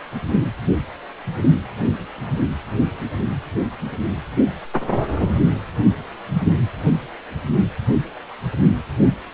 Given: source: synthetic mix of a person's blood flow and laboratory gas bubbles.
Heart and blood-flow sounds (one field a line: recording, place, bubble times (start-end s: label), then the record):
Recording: Doppler ultrasound of blood flow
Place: precordium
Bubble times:
no bubbles
From the record:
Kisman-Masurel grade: 000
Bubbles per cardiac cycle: 0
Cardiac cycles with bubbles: 0%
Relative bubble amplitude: no bubbles discernible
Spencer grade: 0 (complete lack of bubble signals)